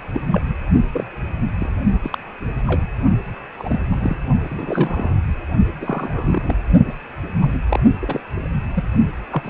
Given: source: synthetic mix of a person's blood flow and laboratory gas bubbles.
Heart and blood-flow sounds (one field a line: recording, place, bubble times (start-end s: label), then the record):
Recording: Doppler ultrasound of blood flow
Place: precordium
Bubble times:
0.00-0.02 s: bubbles
0.13-0.20 s: bubbles
0.32-0.42 s: bubbles
0.93-1.07 s: bubbles
1.55-1.70 s: bubbles
2.03-2.18 s: bubbles
2.66-2.81 s: bubbles
3.58-3.80 s: bubbles
3.91-4.17 s: bubbles
4.50-5.16 s: bubbles
5.80-6.55 s: bubbles
6.87-6.92 s: bubbles
7.42-7.58 s: bubbles
7.69-7.79 s: bubbles
8.02-8.21 s: bubbles
8.74-8.84 s: bubbles
9.30-9.50 s: bubbles
From the record:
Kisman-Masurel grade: 242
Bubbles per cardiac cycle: several, 3 to 8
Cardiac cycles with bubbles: 100%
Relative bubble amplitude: moderate (0.250 to 0.450)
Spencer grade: 3 (all of the cardiac periods contain showers or single bubble signals, but not dominating or overriding the cardiac motion signals)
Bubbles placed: only in the low amplitude regions of the cardiac cycle